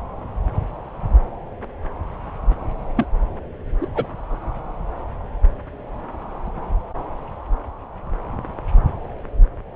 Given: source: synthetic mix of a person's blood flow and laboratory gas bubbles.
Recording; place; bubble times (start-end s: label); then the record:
Doppler ultrasound of blood flow; subclavian vein
2.96-3.05 s: bubbles
3.81-3.87 s: bubbles
3.94-4.07 s: bubbles
From the record:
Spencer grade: 2 (many but less than half of the cardiac periods contain bubble signals, singularly or in groups); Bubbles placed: anywhere in the cardiac cycle